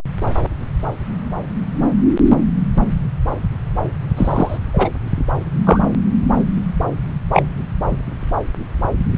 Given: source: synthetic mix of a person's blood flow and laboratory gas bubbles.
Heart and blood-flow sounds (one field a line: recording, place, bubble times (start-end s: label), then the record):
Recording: Doppler ultrasound of blood flow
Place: subclavian vein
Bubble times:
4.17-4.58 s: bubbles
4.73-4.89 s: bubbles
5.67-5.83 s: bubbles
7.33-7.44 s: bubbles
From the record:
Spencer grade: 2 (many but less than half of the cardiac periods contain bubble signals, singularly or in groups)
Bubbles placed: anywhere in the cardiac cycle